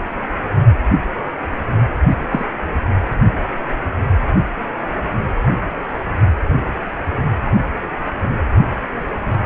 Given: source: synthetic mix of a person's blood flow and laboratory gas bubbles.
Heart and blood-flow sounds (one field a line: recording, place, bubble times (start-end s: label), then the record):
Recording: Doppler ultrasound of blood flow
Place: precordium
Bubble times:
2.31-2.46 s: bubbles
From the record:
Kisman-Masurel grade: 112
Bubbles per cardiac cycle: 1 to 2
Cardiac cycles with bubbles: 1 to 10%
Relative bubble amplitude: moderate (0.250 to 0.450)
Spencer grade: 1 (occasional bubble signal discernible with the cardiac motion signal, with majority of cardiac periods free of bubbles)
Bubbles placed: anywhere in the cardiac cycle